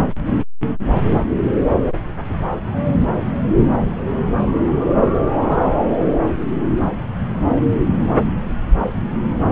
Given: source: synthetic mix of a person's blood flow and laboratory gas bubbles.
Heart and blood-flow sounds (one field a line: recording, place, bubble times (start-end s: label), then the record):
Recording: Doppler ultrasound of blood flow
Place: subclavian vein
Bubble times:
5.49-5.58 s: bubbles
From the record:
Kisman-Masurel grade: 112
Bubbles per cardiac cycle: 1 to 2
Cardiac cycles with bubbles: 1 to 10%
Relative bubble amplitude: moderate (0.250 to 0.450)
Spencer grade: 1 (occasional bubble signal discernible with the cardiac motion signal, with majority of cardiac periods free of bubbles)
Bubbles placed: anywhere in the cardiac cycle